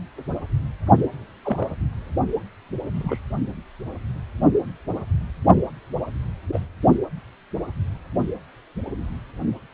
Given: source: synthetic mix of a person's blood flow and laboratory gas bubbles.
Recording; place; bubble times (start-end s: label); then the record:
Doppler ultrasound of blood flow; precordium
1.44-1.68 s: bubbles
2.95-3.19 s: bubbles
6.52-6.60 s: bubbles
From the record:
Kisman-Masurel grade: 121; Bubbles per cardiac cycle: 1 to 2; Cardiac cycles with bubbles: 10 to 50%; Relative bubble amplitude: barely perceptible (0.100 to 0.250); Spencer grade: 2 (many but less than half of the cardiac periods contain bubble signals, singularly or in groups); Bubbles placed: only in the low amplitude regions of the cardiac cycle